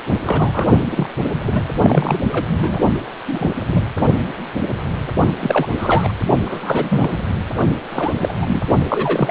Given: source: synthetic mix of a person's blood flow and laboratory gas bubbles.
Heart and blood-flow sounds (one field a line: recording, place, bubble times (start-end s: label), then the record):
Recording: Doppler ultrasound of blood flow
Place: precordium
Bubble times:
0.25-0.70 s: bubbles
0.90-1.07 s: bubbles
1.44-1.64 s: bubbles
1.74-2.20 s: bubbles
2.32-2.46 s: bubbles
2.59-2.79 s: bubbles
3.27-3.50 s: bubbles
3.68-3.89 s: bubbles
5.41-5.69 s: bubbles
5.78-6.12 s: bubbles
6.44-7.17 s: bubbles
7.92-8.13 s: bubbles
8.20-8.33 s: bubbles
8.41-8.61 s: bubbles
8.88-9.30 s: bubbles
From the record:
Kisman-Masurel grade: 232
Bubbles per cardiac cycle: several, 3 to 8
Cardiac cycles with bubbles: 50 to 99%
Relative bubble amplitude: moderate (0.250 to 0.450)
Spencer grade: 3 (all of the cardiac periods contain showers or single bubble signals, but not dominating or overriding the cardiac motion signals)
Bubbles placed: only in the low amplitude regions of the cardiac cycle